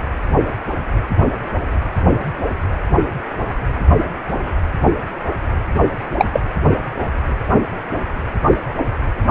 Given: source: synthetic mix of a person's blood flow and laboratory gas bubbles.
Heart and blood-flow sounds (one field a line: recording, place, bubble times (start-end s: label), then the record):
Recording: Doppler ultrasound of blood flow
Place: precordium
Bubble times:
6.18-6.26 s: bubbles
6.32-6.40 s: bubbles
From the record:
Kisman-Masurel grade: 113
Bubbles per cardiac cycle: 1 to 2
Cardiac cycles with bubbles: 1 to 10%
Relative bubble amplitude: loud (0.450 to 0.775)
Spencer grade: 1 (occasional bubble signal discernible with the cardiac motion signal, with majority of cardiac periods free of bubbles)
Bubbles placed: anywhere in the cardiac cycle